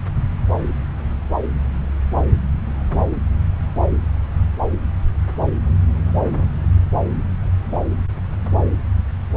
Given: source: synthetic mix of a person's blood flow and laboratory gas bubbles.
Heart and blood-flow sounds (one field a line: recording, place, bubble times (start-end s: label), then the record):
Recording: Doppler ultrasound of blood flow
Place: subclavian vein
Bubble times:
no bubbles
From the record:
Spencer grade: 0 (complete lack of bubble signals)